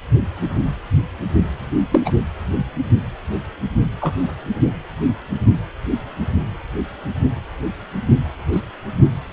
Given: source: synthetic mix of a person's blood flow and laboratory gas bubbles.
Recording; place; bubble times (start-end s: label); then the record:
Doppler ultrasound of blood flow; precordium
1.91-2.01 s: bubbles
2.05-2.12 s: bubbles
4.00-4.25 s: bubbles
8.52-8.60 s: bubbles
From the record:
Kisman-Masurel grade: 123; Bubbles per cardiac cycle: 1 to 2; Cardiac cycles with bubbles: 10 to 50%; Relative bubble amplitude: loud (0.450 to 0.775); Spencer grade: 2 (many but less than half of the cardiac periods contain bubble signals, singularly or in groups); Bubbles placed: only in the low amplitude regions of the cardiac cycle